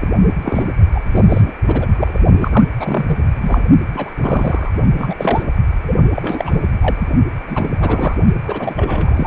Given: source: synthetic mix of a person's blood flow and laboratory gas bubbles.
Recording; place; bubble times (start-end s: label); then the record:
Doppler ultrasound of blood flow; precordium
0.01-0.09 s: bubbles
0.42-0.68 s: bubbles
0.94-1.00 s: bubbles
1.04-1.54 s: bubbles
1.67-1.87 s: bubbles
1.97-2.18 s: bubbles
2.41-2.65 s: bubbles
2.79-3.18 s: bubbles
3.41-3.65 s: bubbles
3.94-4.10 s: bubbles
4.17-4.71 s: bubbles
4.98-5.15 s: bubbles
5.18-5.45 s: bubbles
5.86-5.93 s: bubbles
6.16-6.62 s: bubbles
6.79-7.09 s: bubbles
7.47-7.71 s: bubbles
7.80-8.14 s: bubbles
8.47-9.27 s: bubbles
From the record:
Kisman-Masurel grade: 342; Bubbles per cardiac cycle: rolling drumbeat, 9 or more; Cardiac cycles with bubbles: 100%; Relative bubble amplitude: moderate (0.250 to 0.450); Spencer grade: 3 (all of the cardiac periods contain showers or single bubble signals, but not dominating or overriding the cardiac motion signals); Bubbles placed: only in the low amplitude regions of the cardiac cycle